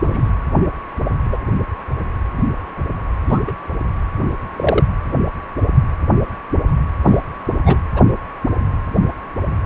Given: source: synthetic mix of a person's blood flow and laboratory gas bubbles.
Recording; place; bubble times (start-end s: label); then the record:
Doppler ultrasound of blood flow; precordium
0.04-0.29 s: bubbles
1.31-1.38 s: bubbles
3.29-3.39 s: bubbles
3.47-3.52 s: bubbles
4.56-4.84 s: bubbles
7.04-7.21 s: bubbles
7.65-7.78 s: bubbles
7.94-8.01 s: bubbles
From the record:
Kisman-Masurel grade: 122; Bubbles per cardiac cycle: 1 to 2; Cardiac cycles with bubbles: 10 to 50%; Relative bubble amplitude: moderate (0.250 to 0.450); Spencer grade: 2 (many but less than half of the cardiac periods contain bubble signals, singularly or in groups); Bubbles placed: anywhere in the cardiac cycle